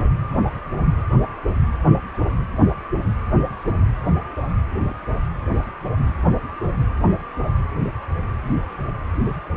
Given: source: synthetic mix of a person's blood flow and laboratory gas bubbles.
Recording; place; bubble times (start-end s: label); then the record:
Doppler ultrasound of blood flow; precordium
0.54-0.60 s: bubbles
4.76-4.80 s: bubbles
4.88-4.93 s: bubbles
From the record:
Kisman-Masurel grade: 121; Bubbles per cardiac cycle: 1 to 2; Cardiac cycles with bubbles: 10 to 50%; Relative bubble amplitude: barely perceptible (0.100 to 0.250); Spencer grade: 2 (many but less than half of the cardiac periods contain bubble signals, singularly or in groups); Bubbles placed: anywhere in the cardiac cycle